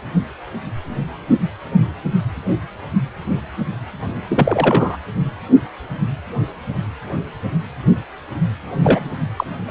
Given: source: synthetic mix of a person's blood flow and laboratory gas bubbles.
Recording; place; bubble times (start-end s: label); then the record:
Doppler ultrasound of blood flow; precordium
4.29-4.97 s: bubbles
8.83-9.11 s: bubbles
9.37-9.44 s: bubbles
9.67-9.70 s: bubbles
From the record:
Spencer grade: 2 (many but less than half of the cardiac periods contain bubble signals, singularly or in groups); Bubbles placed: anywhere in the cardiac cycle